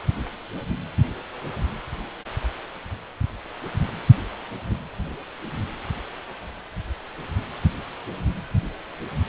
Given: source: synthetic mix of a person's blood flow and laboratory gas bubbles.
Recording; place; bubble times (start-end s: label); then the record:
Doppler ultrasound of blood flow; precordium
no bubbles
From the record:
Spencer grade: 0 (complete lack of bubble signals)